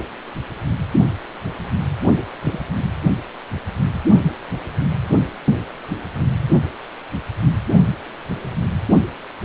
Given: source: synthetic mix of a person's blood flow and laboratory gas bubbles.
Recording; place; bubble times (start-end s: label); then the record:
Doppler ultrasound of blood flow; precordium
2.42-2.60 s: bubbles
From the record:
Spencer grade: 1 (occasional bubble signal discernible with the cardiac motion signal, with majority of cardiac periods free of bubbles); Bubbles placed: only in the low amplitude regions of the cardiac cycle